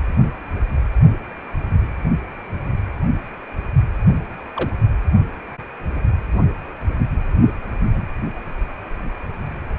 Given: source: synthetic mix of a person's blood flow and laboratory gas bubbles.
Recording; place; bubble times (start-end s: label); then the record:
Doppler ultrasound of blood flow; precordium
4.56-4.70 s: bubbles
From the record:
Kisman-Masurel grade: 111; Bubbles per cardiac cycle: 1 to 2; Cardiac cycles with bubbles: 1 to 10%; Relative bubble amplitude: barely perceptible (0.100 to 0.250); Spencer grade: 1 (occasional bubble signal discernible with the cardiac motion signal, with majority of cardiac periods free of bubbles); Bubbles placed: only in the low amplitude regions of the cardiac cycle